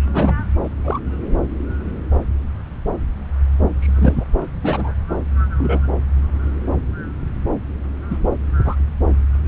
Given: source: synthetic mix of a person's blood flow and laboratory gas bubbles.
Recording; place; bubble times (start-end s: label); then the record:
Doppler ultrasound of blood flow; subclavian vein
0.13-0.35 s: bubbles
0.63-0.68 s: bubbles
0.84-0.99 s: bubbles
3.79-4.25 s: bubbles
4.62-4.92 s: bubbles
5.58-5.80 s: bubbles
8.10-8.17 s: bubbles
8.65-8.75 s: bubbles
From the record:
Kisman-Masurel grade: 123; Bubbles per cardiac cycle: 1 to 2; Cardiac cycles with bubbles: 10 to 50%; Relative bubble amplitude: loud (0.450 to 0.775); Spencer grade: 2 (many but less than half of the cardiac periods contain bubble signals, singularly or in groups); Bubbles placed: anywhere in the cardiac cycle